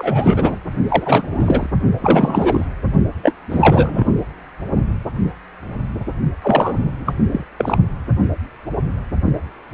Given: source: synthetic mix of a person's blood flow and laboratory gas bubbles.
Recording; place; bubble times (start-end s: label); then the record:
Doppler ultrasound of blood flow; precordium
0.00-0.59 s: bubbles
0.88-1.67 s: bubbles
2.02-2.65 s: bubbles
3.23-3.33 s: bubbles
3.50-4.05 s: bubbles
6.42-7.15 s: bubbles
7.32-7.45 s: bubbles
7.57-7.78 s: bubbles
From the record:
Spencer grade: 3 (all of the cardiac periods contain showers or single bubble signals, but not dominating or overriding the cardiac motion signals); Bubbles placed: only in the low amplitude regions of the cardiac cycle